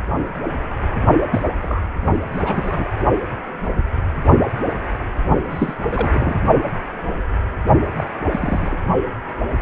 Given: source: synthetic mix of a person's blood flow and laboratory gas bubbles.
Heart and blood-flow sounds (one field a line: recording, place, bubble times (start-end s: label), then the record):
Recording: Doppler ultrasound of blood flow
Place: precordium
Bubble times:
1.31-1.42 s: bubbles
1.62-1.82 s: bubbles
2.33-2.85 s: bubbles
5.50-5.73 s: bubbles
5.80-6.39 s: bubbles
7.97-8.04 s: bubbles
8.32-8.79 s: bubbles
From the record:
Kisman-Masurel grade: 232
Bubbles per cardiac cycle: several, 3 to 8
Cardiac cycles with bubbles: 50 to 99%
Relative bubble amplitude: moderate (0.250 to 0.450)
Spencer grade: 3 (all of the cardiac periods contain showers or single bubble signals, but not dominating or overriding the cardiac motion signals)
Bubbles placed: only in the low amplitude regions of the cardiac cycle